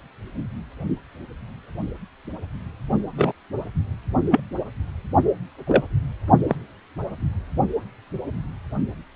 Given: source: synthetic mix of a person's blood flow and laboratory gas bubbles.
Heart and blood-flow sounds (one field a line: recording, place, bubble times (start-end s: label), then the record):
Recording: Doppler ultrasound of blood flow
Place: precordium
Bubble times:
3.17-3.33 s: bubbles
4.30-4.40 s: bubbles
5.67-5.83 s: bubbles
6.47-6.55 s: bubbles
From the record:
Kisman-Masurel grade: 123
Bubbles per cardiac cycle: 1 to 2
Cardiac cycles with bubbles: 10 to 50%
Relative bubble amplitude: loud (0.450 to 0.775)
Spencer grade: 2 (many but less than half of the cardiac periods contain bubble signals, singularly or in groups)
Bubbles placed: only in the low amplitude regions of the cardiac cycle